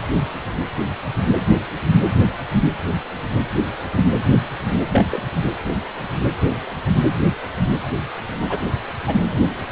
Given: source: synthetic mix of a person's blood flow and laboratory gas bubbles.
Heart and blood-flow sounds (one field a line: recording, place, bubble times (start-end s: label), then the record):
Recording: Doppler ultrasound of blood flow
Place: precordium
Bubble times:
4.92-5.05 s: bubbles
5.11-5.25 s: bubbles
8.49-8.59 s: bubbles
9.01-9.19 s: bubbles
From the record:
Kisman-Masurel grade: 112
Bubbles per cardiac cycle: 1 to 2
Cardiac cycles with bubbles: 1 to 10%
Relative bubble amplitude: moderate (0.250 to 0.450)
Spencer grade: 1 (occasional bubble signal discernible with the cardiac motion signal, with majority of cardiac periods free of bubbles)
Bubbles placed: anywhere in the cardiac cycle